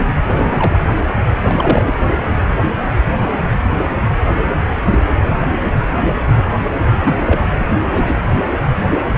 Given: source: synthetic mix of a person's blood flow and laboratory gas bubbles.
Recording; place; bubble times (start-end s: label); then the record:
Doppler ultrasound of blood flow; precordium
0.29-0.81 s: bubbles
1.42-1.92 s: bubbles
6.90-7.41 s: bubbles
7.58-7.70 s: bubbles
7.81-8.17 s: bubbles
From the record:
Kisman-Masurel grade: 222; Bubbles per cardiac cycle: several, 3 to 8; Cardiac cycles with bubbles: 10 to 50%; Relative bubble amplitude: moderate (0.250 to 0.450); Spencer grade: 2 (many but less than half of the cardiac periods contain bubble signals, singularly or in groups); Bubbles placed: anywhere in the cardiac cycle